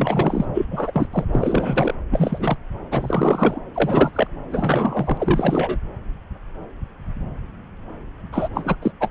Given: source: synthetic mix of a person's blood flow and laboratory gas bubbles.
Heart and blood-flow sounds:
Doppler ultrasound of blood flow; subclavian vein
0.00-0.46 s: bubbles
0.54-0.66 s: bubbles
0.71-1.07 s: bubbles
1.11-1.25 s: bubbles
1.33-1.94 s: bubbles
2.11-2.56 s: bubbles
2.90-3.59 s: bubbles
3.75-4.27 s: bubbles
4.51-5.78 s: bubbles
8.32-8.48 s: bubbles
8.54-8.75 s: bubbles
8.81-8.91 s: bubbles
9.00-9.08 s: bubbles
From the record:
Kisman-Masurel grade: 332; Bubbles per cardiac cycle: rolling drumbeat, 9 or more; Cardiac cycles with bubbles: 50 to 99%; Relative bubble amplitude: moderate (0.250 to 0.450); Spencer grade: 3 (all of the cardiac periods contain showers or single bubble signals, but not dominating or overriding the cardiac motion signals); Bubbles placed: anywhere in the cardiac cycle

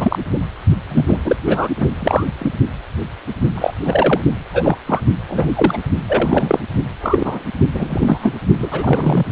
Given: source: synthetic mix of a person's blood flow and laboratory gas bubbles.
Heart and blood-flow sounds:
Doppler ultrasound of blood flow; precordium
0.00-0.18 s: bubbles
0.33-0.39 s: bubbles
0.89-1.04 s: bubbles
1.07-1.19 s: bubbles
1.25-1.36 s: bubbles
1.46-1.69 s: bubbles
1.76-1.86 s: bubbles
1.95-2.27 s: bubbles
2.38-2.51 s: bubbles
3.54-3.72 s: bubbles
3.84-4.21 s: bubbles
4.53-4.77 s: bubbles
4.87-5.00 s: bubbles
5.29-5.78 s: bubbles
6.08-6.59 s: bubbles
7.00-7.44 s: bubbles
7.73-8.32 s: bubbles
8.59-9.24 s: bubbles
From the record:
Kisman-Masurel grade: 233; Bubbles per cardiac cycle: several, 3 to 8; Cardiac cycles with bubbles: 50 to 99%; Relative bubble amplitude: loud (0.450 to 0.775); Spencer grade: 3 (all of the cardiac periods contain showers or single bubble signals, but not dominating or overriding the cardiac motion signals); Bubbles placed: only in the low amplitude regions of the cardiac cycle

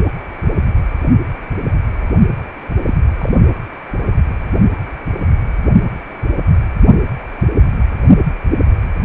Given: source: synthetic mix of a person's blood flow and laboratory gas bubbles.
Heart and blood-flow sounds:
Doppler ultrasound of blood flow; precordium
2.86-2.94 s: bubbles
3.19-3.33 s: bubbles
From the record:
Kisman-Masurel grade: 122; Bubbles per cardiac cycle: 1 to 2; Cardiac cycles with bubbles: 10 to 50%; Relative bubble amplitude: moderate (0.250 to 0.450); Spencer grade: 2 (many but less than half of the cardiac periods contain bubble signals, singularly or in groups); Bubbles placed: only in the low amplitude regions of the cardiac cycle

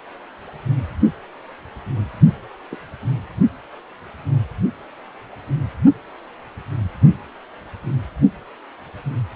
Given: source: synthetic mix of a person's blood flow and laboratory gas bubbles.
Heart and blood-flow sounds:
Doppler ultrasound of blood flow; precordium
2.71-2.76 s: bubbles
From the record:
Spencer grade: 1 (occasional bubble signal discernible with the cardiac motion signal, with majority of cardiac periods free of bubbles); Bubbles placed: only in the low amplitude regions of the cardiac cycle

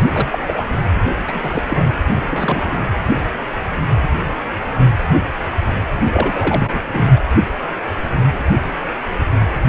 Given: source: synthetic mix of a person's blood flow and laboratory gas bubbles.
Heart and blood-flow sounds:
Doppler ultrasound of blood flow; precordium
0.15-0.39 s: bubbles
0.47-0.66 s: bubbles
1.27-1.63 s: bubbles
1.69-1.84 s: bubbles
2.29-2.84 s: bubbles
6.12-6.81 s: bubbles
6.93-7.03 s: bubbles
7.15-7.20 s: bubbles
9.65-9.69 s: bubbles
From the record:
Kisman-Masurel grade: 222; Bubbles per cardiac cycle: several, 3 to 8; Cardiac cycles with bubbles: 10 to 50%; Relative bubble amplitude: moderate (0.250 to 0.450); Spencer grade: 2 (many but less than half of the cardiac periods contain bubble signals, singularly or in groups); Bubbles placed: anywhere in the cardiac cycle

